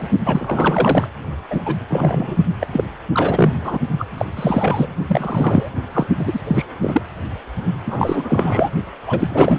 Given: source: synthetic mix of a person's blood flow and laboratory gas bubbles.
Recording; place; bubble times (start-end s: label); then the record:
Doppler ultrasound of blood flow; precordium
0.00-0.08 s: bubbles
0.25-1.08 s: bubbles
1.50-1.75 s: bubbles
1.90-2.38 s: bubbles
2.60-2.67 s: bubbles
2.71-2.84 s: bubbles
3.12-3.53 s: bubbles
3.63-3.78 s: bubbles
3.98-4.06 s: bubbles
4.18-4.25 s: bubbles
4.36-4.89 s: bubbles
5.07-5.71 s: bubbles
5.93-6.07 s: bubbles
6.19-6.40 s: bubbles
6.47-6.66 s: bubbles
6.82-7.02 s: bubbles
7.86-8.70 s: bubbles
9.05-9.59 s: bubbles
From the record:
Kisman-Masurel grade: 343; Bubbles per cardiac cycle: rolling drumbeat, 9 or more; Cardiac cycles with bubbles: 100%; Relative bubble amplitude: loud (0.450 to 0.775); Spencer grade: 3 (all of the cardiac periods contain showers or single bubble signals, but not dominating or overriding the cardiac motion signals); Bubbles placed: only in the low amplitude regions of the cardiac cycle